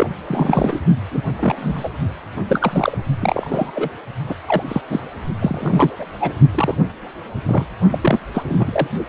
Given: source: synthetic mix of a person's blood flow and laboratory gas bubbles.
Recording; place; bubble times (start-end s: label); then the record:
Doppler ultrasound of blood flow; precordium
0.00-0.10 s: bubbles
0.27-0.80 s: bubbles
1.10-1.22 s: bubbles
1.39-1.89 s: bubbles
2.48-2.98 s: bubbles
3.19-3.71 s: bubbles
3.75-3.90 s: bubbles
4.28-4.34 s: bubbles
4.47-4.63 s: bubbles
4.68-4.81 s: bubbles
4.89-5.00 s: bubbles
5.40-5.91 s: bubbles
5.98-6.07 s: bubbles
6.20-6.32 s: bubbles
6.54-6.74 s: bubbles
7.46-7.66 s: bubbles
7.92-7.99 s: bubbles
8.02-8.20 s: bubbles
8.34-8.88 s: bubbles
From the record:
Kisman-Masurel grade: 243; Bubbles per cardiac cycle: several, 3 to 8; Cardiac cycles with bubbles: 100%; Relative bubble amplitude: loud (0.450 to 0.775); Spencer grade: 3 (all of the cardiac periods contain showers or single bubble signals, but not dominating or overriding the cardiac motion signals); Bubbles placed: only in the low amplitude regions of the cardiac cycle